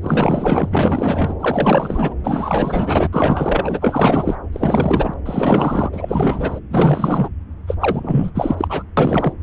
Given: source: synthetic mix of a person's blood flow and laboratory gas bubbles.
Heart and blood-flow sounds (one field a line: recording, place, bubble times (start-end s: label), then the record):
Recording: Doppler ultrasound of blood flow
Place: subclavian vein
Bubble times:
0.01-0.68 s: bubbles
0.71-1.34 s: bubbles
1.40-2.14 s: bubbles
2.24-3.07 s: bubbles
3.12-4.36 s: bubbles
4.52-5.14 s: bubbles
5.25-5.90 s: bubbles
5.92-6.59 s: bubbles
6.71-7.29 s: bubbles
7.67-7.76 s: bubbles
7.80-8.31 s: bubbles
8.34-8.83 s: bubbles
8.97-9.33 s: bubbles
From the record:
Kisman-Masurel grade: 444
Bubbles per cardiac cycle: continuous sound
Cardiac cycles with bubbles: 100%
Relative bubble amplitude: maximal (0.775 to 0.999)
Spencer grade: 4 (maximum detectable bubble signal sounding continuously throughout systole and diastole of every cardiac period, and overriding the amplitude of the normal cardiac signals)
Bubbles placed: anywhere in the cardiac cycle